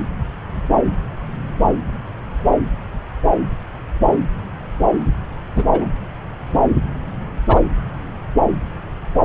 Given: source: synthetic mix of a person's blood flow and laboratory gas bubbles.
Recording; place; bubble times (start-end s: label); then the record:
Doppler ultrasound of blood flow; subclavian vein
5.55-5.64 s: bubbles
5.71-5.87 s: bubbles
7.48-7.59 s: bubbles
From the record:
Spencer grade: 2 (many but less than half of the cardiac periods contain bubble signals, singularly or in groups); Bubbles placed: anywhere in the cardiac cycle